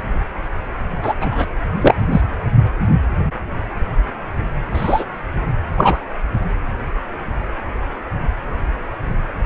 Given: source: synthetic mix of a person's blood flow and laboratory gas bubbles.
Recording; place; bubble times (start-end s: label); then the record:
Doppler ultrasound of blood flow; precordium
1.02-1.13 s: bubbles
1.21-1.46 s: bubbles
1.81-1.95 s: bubbles
2.12-2.22 s: bubbles
4.74-5.04 s: bubbles
5.76-5.97 s: bubbles
From the record:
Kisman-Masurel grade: 123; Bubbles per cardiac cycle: 1 to 2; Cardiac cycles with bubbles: 10 to 50%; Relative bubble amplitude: loud (0.450 to 0.775); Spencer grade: 2 (many but less than half of the cardiac periods contain bubble signals, singularly or in groups); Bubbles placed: anywhere in the cardiac cycle